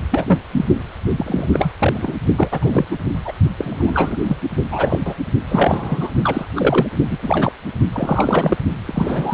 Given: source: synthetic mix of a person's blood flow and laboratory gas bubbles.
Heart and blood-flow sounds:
Doppler ultrasound of blood flow; precordium
0.11-0.39 s: bubbles
0.53-0.65 s: bubbles
1.16-1.50 s: bubbles
1.53-1.72 s: bubbles
1.78-2.13 s: bubbles
2.36-2.49 s: bubbles
2.51-2.86 s: bubbles
2.91-2.97 s: bubbles
3.25-3.32 s: bubbles
3.57-4.22 s: bubbles
4.27-4.37 s: bubbles
4.71-5.00 s: bubbles
5.05-5.15 s: bubbles
5.49-6.14 s: bubbles
6.23-6.46 s: bubbles
6.56-6.87 s: bubbles
7.11-7.18 s: bubbles
7.22-7.52 s: bubbles
7.92-8.57 s: bubbles
8.85-9.34 s: bubbles
From the record:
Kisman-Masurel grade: 243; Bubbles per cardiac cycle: several, 3 to 8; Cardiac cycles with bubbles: 100%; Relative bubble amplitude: loud (0.450 to 0.775); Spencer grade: 3 (all of the cardiac periods contain showers or single bubble signals, but not dominating or overriding the cardiac motion signals); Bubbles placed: only in the low amplitude regions of the cardiac cycle

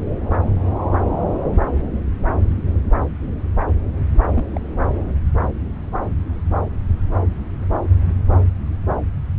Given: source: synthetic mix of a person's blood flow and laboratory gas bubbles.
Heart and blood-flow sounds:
Doppler ultrasound of blood flow; subclavian vein
4.34-4.44 s: bubbles
4.53-4.60 s: bubbles
From the record:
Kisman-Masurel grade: 111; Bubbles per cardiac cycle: 1 to 2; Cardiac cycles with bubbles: 1 to 10%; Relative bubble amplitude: barely perceptible (0.100 to 0.250); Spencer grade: 1 (occasional bubble signal discernible with the cardiac motion signal, with majority of cardiac periods free of bubbles); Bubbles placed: anywhere in the cardiac cycle

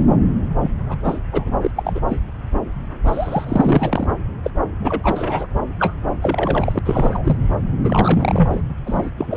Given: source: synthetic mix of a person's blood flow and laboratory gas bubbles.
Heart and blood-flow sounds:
Doppler ultrasound of blood flow; subclavian vein
0.61-0.71 s: bubbles
0.89-0.98 s: bubbles
1.03-1.20 s: bubbles
1.32-1.57 s: bubbles
1.61-1.71 s: bubbles
1.76-2.01 s: bubbles
2.08-2.17 s: bubbles
3.05-4.14 s: bubbles
4.44-4.50 s: bubbles
4.82-5.47 s: bubbles
5.79-5.94 s: bubbles
6.22-6.79 s: bubbles
6.85-7.37 s: bubbles
7.84-8.61 s: bubbles
8.86-9.10 s: bubbles
9.17-9.37 s: bubbles
From the record:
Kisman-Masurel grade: 242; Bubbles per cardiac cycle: several, 3 to 8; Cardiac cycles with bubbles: 100%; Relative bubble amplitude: moderate (0.250 to 0.450); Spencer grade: 3 (all of the cardiac periods contain showers or single bubble signals, but not dominating or overriding the cardiac motion signals); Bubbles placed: anywhere in the cardiac cycle

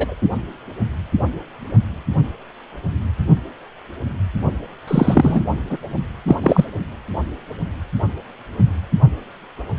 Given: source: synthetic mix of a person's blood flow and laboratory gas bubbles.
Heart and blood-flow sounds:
Doppler ultrasound of blood flow; precordium
0.00-0.15 s: bubbles
4.88-5.42 s: bubbles
5.70-5.78 s: bubbles
6.27-6.37 s: bubbles
6.41-6.65 s: bubbles
From the record:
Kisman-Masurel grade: 223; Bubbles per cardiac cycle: several, 3 to 8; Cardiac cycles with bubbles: 10 to 50%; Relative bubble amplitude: loud (0.450 to 0.775); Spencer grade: 2 (many but less than half of the cardiac periods contain bubble signals, singularly or in groups); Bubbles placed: only in the low amplitude regions of the cardiac cycle

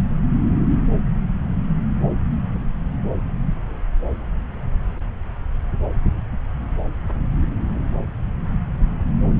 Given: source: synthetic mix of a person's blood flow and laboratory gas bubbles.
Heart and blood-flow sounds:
Doppler ultrasound of blood flow; subclavian vein
no bubbles
From the record:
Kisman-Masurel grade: 000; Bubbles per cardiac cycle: 0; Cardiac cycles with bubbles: 0%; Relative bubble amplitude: no bubbles discernible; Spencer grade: 0 (complete lack of bubble signals)

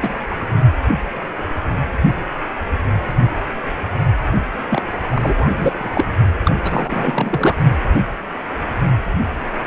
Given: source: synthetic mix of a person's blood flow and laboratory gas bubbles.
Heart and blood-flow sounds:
Doppler ultrasound of blood flow; precordium
0.01-0.22 s: bubbles
0.30-0.36 s: bubbles
4.69-4.82 s: bubbles
5.10-5.48 s: bubbles
5.56-5.72 s: bubbles
5.79-6.13 s: bubbles
6.44-6.55 s: bubbles
6.63-7.58 s: bubbles
From the record:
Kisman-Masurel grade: 332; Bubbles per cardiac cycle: rolling drumbeat, 9 or more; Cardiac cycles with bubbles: 50 to 99%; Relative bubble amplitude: moderate (0.250 to 0.450); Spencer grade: 3 (all of the cardiac periods contain showers or single bubble signals, but not dominating or overriding the cardiac motion signals); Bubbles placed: only in the low amplitude regions of the cardiac cycle

